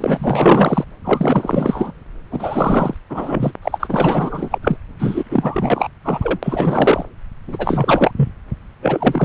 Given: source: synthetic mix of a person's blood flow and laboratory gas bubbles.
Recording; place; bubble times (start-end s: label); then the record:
Doppler ultrasound of blood flow; subclavian vein
0.00-0.84 s: bubbles
1.04-1.92 s: bubbles
2.30-2.94 s: bubbles
3.09-3.54 s: bubbles
3.62-4.58 s: bubbles
4.62-4.77 s: bubbles
4.99-5.88 s: bubbles
6.04-6.38 s: bubbles
6.42-7.05 s: bubbles
7.47-8.11 s: bubbles
8.16-8.29 s: bubbles
8.81-9.25 s: bubbles
From the record:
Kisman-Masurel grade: 444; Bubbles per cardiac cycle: continuous sound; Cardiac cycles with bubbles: 100%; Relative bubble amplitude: maximal (0.775 to 0.999); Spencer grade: 4 (maximum detectable bubble signal sounding continuously throughout systole and diastole of every cardiac period, and overriding the amplitude of the normal cardiac signals); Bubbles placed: anywhere in the cardiac cycle